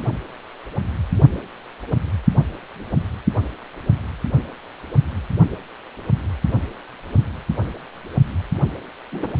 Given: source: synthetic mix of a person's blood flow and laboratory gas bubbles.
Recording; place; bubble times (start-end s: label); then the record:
Doppler ultrasound of blood flow; precordium
9.12-9.33 s: bubbles
From the record:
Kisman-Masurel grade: 112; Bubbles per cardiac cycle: 1 to 2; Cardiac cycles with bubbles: 1 to 10%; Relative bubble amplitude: moderate (0.250 to 0.450); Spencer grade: 1 (occasional bubble signal discernible with the cardiac motion signal, with majority of cardiac periods free of bubbles); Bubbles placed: only in the low amplitude regions of the cardiac cycle